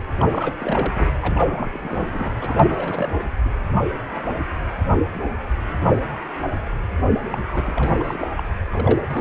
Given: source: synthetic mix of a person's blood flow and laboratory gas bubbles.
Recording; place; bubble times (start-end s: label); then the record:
Doppler ultrasound of blood flow; precordium
0.18-0.26 s: bubbles
0.29-0.53 s: bubbles
0.58-1.10 s: bubbles
1.21-2.31 s: bubbles
2.40-3.31 s: bubbles
3.44-3.49 s: bubbles
7.30-7.38 s: bubbles
7.46-7.93 s: bubbles
7.99-8.28 s: bubbles
8.37-8.44 s: bubbles
8.70-8.98 s: bubbles
9.11-9.21 s: bubbles
From the record:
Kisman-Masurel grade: 332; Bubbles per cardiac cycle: rolling drumbeat, 9 or more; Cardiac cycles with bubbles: 50 to 99%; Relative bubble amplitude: moderate (0.250 to 0.450); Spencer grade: 3 (all of the cardiac periods contain showers or single bubble signals, but not dominating or overriding the cardiac motion signals); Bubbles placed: anywhere in the cardiac cycle